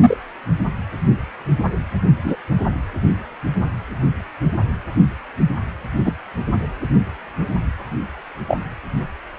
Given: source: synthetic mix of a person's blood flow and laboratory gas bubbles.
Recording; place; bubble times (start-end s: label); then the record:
Doppler ultrasound of blood flow; precordium
0.00-0.17 s: bubbles
2.23-2.36 s: bubbles
6.04-6.12 s: bubbles
8.47-8.57 s: bubbles
From the record:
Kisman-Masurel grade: 123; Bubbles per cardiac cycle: 1 to 2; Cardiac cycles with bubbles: 10 to 50%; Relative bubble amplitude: loud (0.450 to 0.775); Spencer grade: 2 (many but less than half of the cardiac periods contain bubble signals, singularly or in groups); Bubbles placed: anywhere in the cardiac cycle